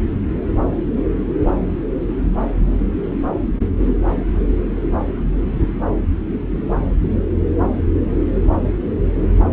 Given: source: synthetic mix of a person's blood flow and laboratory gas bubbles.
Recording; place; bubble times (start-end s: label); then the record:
Doppler ultrasound of blood flow; subclavian vein
no bubbles
From the record:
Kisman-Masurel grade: 000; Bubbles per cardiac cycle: 0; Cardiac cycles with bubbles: 0%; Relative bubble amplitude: no bubbles discernible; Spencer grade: 0 (complete lack of bubble signals)